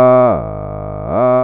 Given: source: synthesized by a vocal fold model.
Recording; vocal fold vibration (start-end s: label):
sustained vowel that changes in the middle
0.00-0.24 s: 126.4 Hz, open quotient 0.35
0.44-1.04 s: 51.4 Hz, open quotient 0.33
1.24-1.44 s: 126.4 Hz, open quotient 0.35